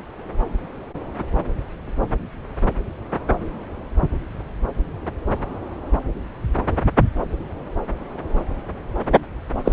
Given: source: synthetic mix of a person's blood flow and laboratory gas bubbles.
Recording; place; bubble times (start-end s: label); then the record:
Doppler ultrasound of blood flow; subclavian vein
9.64-9.72 s: bubbles
From the record:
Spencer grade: 1 (occasional bubble signal discernible with the cardiac motion signal, with majority of cardiac periods free of bubbles); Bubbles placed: anywhere in the cardiac cycle